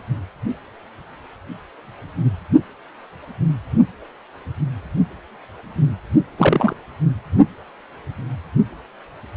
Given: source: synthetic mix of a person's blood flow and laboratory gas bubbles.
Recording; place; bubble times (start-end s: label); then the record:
Doppler ultrasound of blood flow; precordium
6.38-6.73 s: bubbles
From the record:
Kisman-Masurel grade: 113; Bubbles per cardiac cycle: 1 to 2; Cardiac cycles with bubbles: 1 to 10%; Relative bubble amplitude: loud (0.450 to 0.775); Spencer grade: 1 (occasional bubble signal discernible with the cardiac motion signal, with majority of cardiac periods free of bubbles); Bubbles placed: only in the low amplitude regions of the cardiac cycle